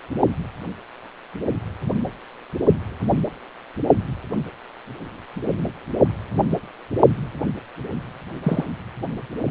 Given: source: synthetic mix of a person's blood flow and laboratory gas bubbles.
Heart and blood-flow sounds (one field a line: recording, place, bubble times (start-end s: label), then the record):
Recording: Doppler ultrasound of blood flow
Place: precordium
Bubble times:
8.43-8.65 s: bubbles
From the record:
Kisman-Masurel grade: 122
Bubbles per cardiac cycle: 1 to 2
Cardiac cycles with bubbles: 10 to 50%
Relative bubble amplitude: moderate (0.250 to 0.450)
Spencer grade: 2 (many but less than half of the cardiac periods contain bubble signals, singularly or in groups)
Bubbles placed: only in the low amplitude regions of the cardiac cycle